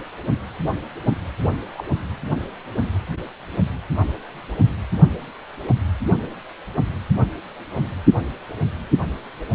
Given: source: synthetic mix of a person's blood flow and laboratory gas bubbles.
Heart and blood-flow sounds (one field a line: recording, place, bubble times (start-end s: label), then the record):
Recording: Doppler ultrasound of blood flow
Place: precordium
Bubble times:
1.74-1.83 s: bubbles
From the record:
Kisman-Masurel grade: 122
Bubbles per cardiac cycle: 1 to 2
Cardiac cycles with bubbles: 10 to 50%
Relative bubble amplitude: moderate (0.250 to 0.450)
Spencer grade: 2 (many but less than half of the cardiac periods contain bubble signals, singularly or in groups)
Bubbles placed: anywhere in the cardiac cycle